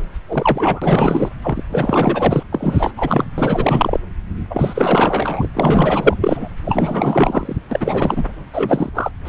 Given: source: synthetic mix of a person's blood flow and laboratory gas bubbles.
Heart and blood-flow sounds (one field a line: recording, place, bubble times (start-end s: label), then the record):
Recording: Doppler ultrasound of blood flow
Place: subclavian vein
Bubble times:
0.28-1.29 s: bubbles
1.42-1.62 s: bubbles
1.70-2.43 s: bubbles
2.52-2.91 s: bubbles
2.97-3.25 s: bubbles
3.38-4.00 s: bubbles
4.50-5.48 s: bubbles
5.54-6.17 s: bubbles
6.21-6.48 s: bubbles
6.65-7.57 s: bubbles
7.71-8.24 s: bubbles
8.53-8.89 s: bubbles
8.94-9.11 s: bubbles
9.25-9.29 s: bubbles
From the record:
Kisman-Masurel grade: 444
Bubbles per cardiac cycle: continuous sound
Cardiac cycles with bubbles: 100%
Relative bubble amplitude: maximal (0.775 to 0.999)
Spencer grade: 4 (maximum detectable bubble signal sounding continuously throughout systole and diastole of every cardiac period, and overriding the amplitude of the normal cardiac signals)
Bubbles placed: anywhere in the cardiac cycle